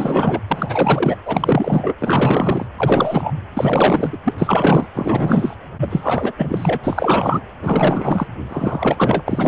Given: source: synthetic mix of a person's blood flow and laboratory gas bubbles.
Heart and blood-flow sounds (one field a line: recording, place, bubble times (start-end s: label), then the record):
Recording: Doppler ultrasound of blood flow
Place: precordium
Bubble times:
0.00-0.42 s: bubbles
0.47-1.16 s: bubbles
1.26-1.94 s: bubbles
1.98-2.67 s: bubbles
2.77-3.31 s: bubbles
3.54-4.18 s: bubbles
4.24-4.34 s: bubbles
4.38-4.87 s: bubbles
4.95-5.56 s: bubbles
5.80-6.32 s: bubbles
6.38-6.79 s: bubbles
6.83-7.41 s: bubbles
7.62-8.27 s: bubbles
8.48-9.48 s: bubbles
From the record:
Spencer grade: 4 (maximum detectable bubble signal sounding continuously throughout systole and diastole of every cardiac period, and overriding the amplitude of the normal cardiac signals)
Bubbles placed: anywhere in the cardiac cycle